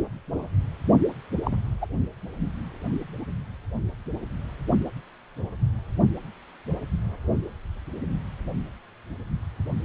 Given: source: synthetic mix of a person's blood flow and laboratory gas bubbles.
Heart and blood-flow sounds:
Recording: Doppler ultrasound of blood flow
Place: precordium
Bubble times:
1.43-1.56 s: bubbles
1.81-1.86 s: bubbles
From the record:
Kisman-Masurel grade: 211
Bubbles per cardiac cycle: several, 3 to 8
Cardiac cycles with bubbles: 1 to 10%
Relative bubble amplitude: barely perceptible (0.100 to 0.250)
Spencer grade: 1 (occasional bubble signal discernible with the cardiac motion signal, with majority of cardiac periods free of bubbles)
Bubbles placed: only in the low amplitude regions of the cardiac cycle

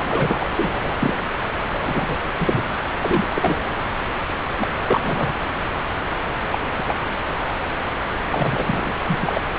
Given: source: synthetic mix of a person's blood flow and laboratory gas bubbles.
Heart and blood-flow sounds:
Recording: Doppler ultrasound of blood flow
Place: subclavian vein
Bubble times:
0.00-0.50 s: bubbles
0.55-0.95 s: bubbles
1.00-1.16 s: bubbles
1.70-2.19 s: bubbles
2.38-2.65 s: bubbles
3.00-3.69 s: bubbles
4.58-4.68 s: bubbles
4.87-5.33 s: bubbles
6.51-6.58 s: bubbles
6.78-6.83 s: bubbles
6.87-6.97 s: bubbles
8.30-8.92 s: bubbles
9.07-9.40 s: bubbles
From the record:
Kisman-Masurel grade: 232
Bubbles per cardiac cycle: several, 3 to 8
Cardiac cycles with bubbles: 50 to 99%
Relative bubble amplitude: moderate (0.250 to 0.450)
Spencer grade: 3 (all of the cardiac periods contain showers or single bubble signals, but not dominating or overriding the cardiac motion signals)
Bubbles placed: anywhere in the cardiac cycle

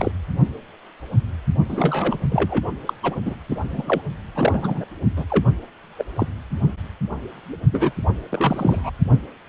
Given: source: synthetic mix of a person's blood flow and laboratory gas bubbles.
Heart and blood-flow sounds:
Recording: Doppler ultrasound of blood flow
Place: precordium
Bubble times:
0.00-0.11 s: bubbles
1.69-2.18 s: bubbles
2.29-2.65 s: bubbles
2.85-2.94 s: bubbles
3.03-3.17 s: bubbles
3.25-3.35 s: bubbles
3.49-4.01 s: bubbles
4.34-4.85 s: bubbles
5.17-5.25 s: bubbles
5.30-5.44 s: bubbles
5.98-6.04 s: bubbles
6.15-6.26 s: bubbles
7.71-7.92 s: bubbles
8.30-8.91 s: bubbles
From the record:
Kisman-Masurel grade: 232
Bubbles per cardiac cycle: several, 3 to 8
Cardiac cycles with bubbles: 50 to 99%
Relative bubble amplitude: moderate (0.250 to 0.450)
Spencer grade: 3 (all of the cardiac periods contain showers or single bubble signals, but not dominating or overriding the cardiac motion signals)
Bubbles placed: only in the low amplitude regions of the cardiac cycle

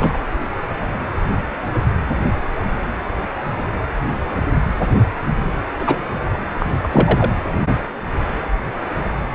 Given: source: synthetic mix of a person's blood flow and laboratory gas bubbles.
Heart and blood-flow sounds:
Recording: Doppler ultrasound of blood flow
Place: precordium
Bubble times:
0.00-0.17 s: bubbles
5.79-5.98 s: bubbles
6.59-6.67 s: bubbles
6.83-7.30 s: bubbles
From the record:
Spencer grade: 2 (many but less than half of the cardiac periods contain bubble signals, singularly or in groups)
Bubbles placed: anywhere in the cardiac cycle

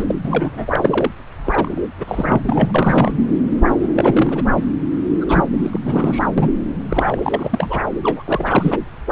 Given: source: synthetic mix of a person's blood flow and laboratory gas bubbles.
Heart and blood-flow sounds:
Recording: Doppler ultrasound of blood flow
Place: subclavian vein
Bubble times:
0.00-0.03 s: bubbles
0.08-0.15 s: bubbles
0.24-1.10 s: bubbles
1.44-1.81 s: bubbles
1.98-2.42 s: bubbles
2.46-3.13 s: bubbles
3.95-4.43 s: bubbles
4.57-4.66 s: bubbles
5.21-5.80 s: bubbles
5.84-6.27 s: bubbles
6.38-6.49 s: bubbles
6.89-7.20 s: bubbles
7.23-7.83 s: bubbles
8.04-8.23 s: bubbles
8.26-8.78 s: bubbles
From the record:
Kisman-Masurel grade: 332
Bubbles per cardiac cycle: rolling drumbeat, 9 or more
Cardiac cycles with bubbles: 50 to 99%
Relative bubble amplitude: moderate (0.250 to 0.450)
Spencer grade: 3 (all of the cardiac periods contain showers or single bubble signals, but not dominating or overriding the cardiac motion signals)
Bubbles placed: anywhere in the cardiac cycle

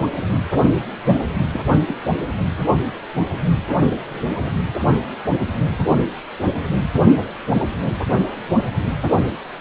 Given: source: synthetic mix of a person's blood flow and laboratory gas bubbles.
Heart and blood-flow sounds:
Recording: Doppler ultrasound of blood flow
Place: precordium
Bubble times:
1.51-1.62 s: bubbles
1.86-1.95 s: bubbles
From the record:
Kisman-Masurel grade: 112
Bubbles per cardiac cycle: 1 to 2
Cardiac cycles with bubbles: 1 to 10%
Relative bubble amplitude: moderate (0.250 to 0.450)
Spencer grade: 1 (occasional bubble signal discernible with the cardiac motion signal, with majority of cardiac periods free of bubbles)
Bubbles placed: anywhere in the cardiac cycle

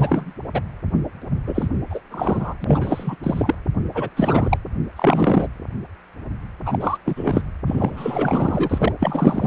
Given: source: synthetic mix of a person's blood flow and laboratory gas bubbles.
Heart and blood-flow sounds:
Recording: Doppler ultrasound of blood flow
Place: precordium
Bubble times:
0.00-0.33 s: bubbles
0.54-0.61 s: bubbles
1.47-1.69 s: bubbles
1.90-2.00 s: bubbles
2.10-2.54 s: bubbles
2.60-3.15 s: bubbles
3.23-3.55 s: bubbles
3.94-4.09 s: bubbles
4.16-4.57 s: bubbles
4.96-5.47 s: bubbles
6.65-6.97 s: bubbles
7.05-7.43 s: bubbles
7.66-8.92 s: bubbles
9.00-9.47 s: bubbles
From the record:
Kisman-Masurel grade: 333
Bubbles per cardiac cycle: rolling drumbeat, 9 or more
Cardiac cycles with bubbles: 50 to 99%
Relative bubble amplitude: loud (0.450 to 0.775)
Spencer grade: 3 (all of the cardiac periods contain showers or single bubble signals, but not dominating or overriding the cardiac motion signals)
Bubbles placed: anywhere in the cardiac cycle

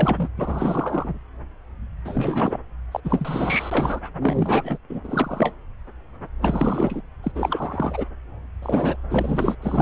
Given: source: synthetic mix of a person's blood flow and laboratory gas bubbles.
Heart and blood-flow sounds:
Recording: Doppler ultrasound of blood flow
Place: subclavian vein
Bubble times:
0.00-0.29 s: bubbles
0.37-1.19 s: bubbles
2.05-2.59 s: bubbles
2.92-3.00 s: bubbles
3.04-4.00 s: bubbles
4.22-4.77 s: bubbles
4.89-5.00 s: bubbles
5.03-5.54 s: bubbles
6.42-7.01 s: bubbles
7.23-7.32 s: bubbles
7.35-8.05 s: bubbles
8.62-8.96 s: bubbles
9.10-9.56 s: bubbles
9.62-9.82 s: bubbles
From the record:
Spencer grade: 3 (all of the cardiac periods contain showers or single bubble signals, but not dominating or overriding the cardiac motion signals)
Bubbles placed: anywhere in the cardiac cycle

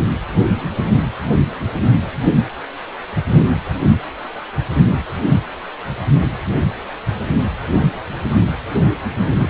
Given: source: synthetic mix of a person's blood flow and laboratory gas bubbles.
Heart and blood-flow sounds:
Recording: Doppler ultrasound of blood flow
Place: precordium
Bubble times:
9.13-9.49 s: bubbles
From the record:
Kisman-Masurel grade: 111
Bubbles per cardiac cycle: 1 to 2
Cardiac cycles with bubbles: 1 to 10%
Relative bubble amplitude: barely perceptible (0.100 to 0.250)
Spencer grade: 1 (occasional bubble signal discernible with the cardiac motion signal, with majority of cardiac periods free of bubbles)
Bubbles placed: anywhere in the cardiac cycle

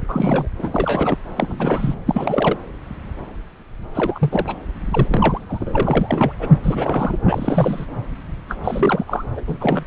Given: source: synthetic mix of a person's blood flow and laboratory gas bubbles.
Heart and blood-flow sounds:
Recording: Doppler ultrasound of blood flow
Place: subclavian vein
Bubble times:
0.08-0.48 s: bubbles
0.58-1.18 s: bubbles
1.36-1.95 s: bubbles
2.06-2.58 s: bubbles
3.94-4.56 s: bubbles
4.91-5.39 s: bubbles
5.49-6.33 s: bubbles
6.39-6.50 s: bubbles
6.64-7.19 s: bubbles
7.24-7.86 s: bubbles
8.49-8.57 s: bubbles
8.64-9.25 s: bubbles
9.37-9.41 s: bubbles
9.47-9.57 s: bubbles
9.61-9.84 s: bubbles
From the record:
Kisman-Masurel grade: 332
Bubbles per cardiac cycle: rolling drumbeat, 9 or more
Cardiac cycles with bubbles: 50 to 99%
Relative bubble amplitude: moderate (0.250 to 0.450)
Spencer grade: 3 (all of the cardiac periods contain showers or single bubble signals, but not dominating or overriding the cardiac motion signals)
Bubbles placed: anywhere in the cardiac cycle

